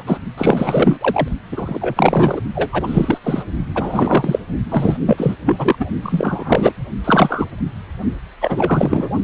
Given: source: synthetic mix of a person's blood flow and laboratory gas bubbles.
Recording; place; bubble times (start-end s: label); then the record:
Doppler ultrasound of blood flow; precordium
0.00-0.03 s: bubbles
0.07-0.18 s: bubbles
0.37-1.28 s: bubbles
1.51-2.41 s: bubbles
2.55-3.18 s: bubbles
3.24-3.43 s: bubbles
3.75-4.39 s: bubbles
4.71-4.97 s: bubbles
5.05-5.35 s: bubbles
5.46-5.86 s: bubbles
6.03-6.73 s: bubbles
7.04-7.45 s: bubbles
8.41-9.10 s: bubbles
From the record:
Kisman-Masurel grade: 343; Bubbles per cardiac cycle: rolling drumbeat, 9 or more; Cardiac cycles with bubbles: 100%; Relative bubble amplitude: loud (0.450 to 0.775); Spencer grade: 3 (all of the cardiac periods contain showers or single bubble signals, but not dominating or overriding the cardiac motion signals); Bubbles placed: only in the low amplitude regions of the cardiac cycle